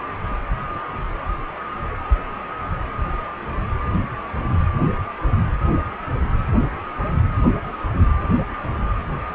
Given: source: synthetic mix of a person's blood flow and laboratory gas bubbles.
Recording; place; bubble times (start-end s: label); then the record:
Doppler ultrasound of blood flow; precordium
no bubbles
From the record:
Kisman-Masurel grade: 000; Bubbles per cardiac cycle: 0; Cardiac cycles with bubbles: 0%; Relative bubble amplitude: no bubbles discernible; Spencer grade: 0 (complete lack of bubble signals)